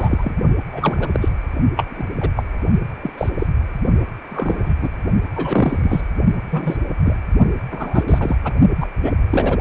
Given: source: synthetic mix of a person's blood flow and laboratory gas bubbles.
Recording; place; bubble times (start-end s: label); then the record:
Doppler ultrasound of blood flow; precordium
0.00-0.39 s: bubbles
0.72-1.08 s: bubbles
1.13-1.29 s: bubbles
1.77-1.84 s: bubbles
1.90-2.05 s: bubbles
2.21-2.30 s: bubbles
2.36-2.42 s: bubbles
3.02-3.10 s: bubbles
3.17-3.29 s: bubbles
3.38-3.46 s: bubbles
4.29-4.74 s: bubbles
4.82-4.89 s: bubbles
5.36-6.07 s: bubbles
6.51-6.77 s: bubbles
7.04-7.17 s: bubbles
7.71-8.03 s: bubbles
8.08-8.37 s: bubbles
8.44-8.53 s: bubbles
8.80-8.88 s: bubbles
9.02-9.12 s: bubbles
9.30-9.59 s: bubbles
From the record:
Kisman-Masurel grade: 243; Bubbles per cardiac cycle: several, 3 to 8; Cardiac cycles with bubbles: 100%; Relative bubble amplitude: loud (0.450 to 0.775); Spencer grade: 3 (all of the cardiac periods contain showers or single bubble signals, but not dominating or overriding the cardiac motion signals); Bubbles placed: only in the low amplitude regions of the cardiac cycle